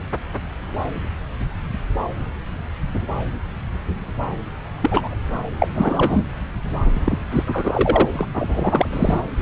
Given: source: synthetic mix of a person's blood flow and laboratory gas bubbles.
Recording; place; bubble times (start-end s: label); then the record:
Doppler ultrasound of blood flow; subclavian vein
4.81-5.16 s: bubbles
5.60-5.68 s: bubbles
5.75-6.24 s: bubbles
7.04-7.18 s: bubbles
7.31-7.43 s: bubbles
7.47-8.08 s: bubbles
8.12-8.26 s: bubbles
8.34-9.20 s: bubbles
From the record:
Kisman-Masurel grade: 223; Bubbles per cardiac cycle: several, 3 to 8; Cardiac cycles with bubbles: 10 to 50%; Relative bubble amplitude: loud (0.450 to 0.775); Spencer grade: 2 (many but less than half of the cardiac periods contain bubble signals, singularly or in groups); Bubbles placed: anywhere in the cardiac cycle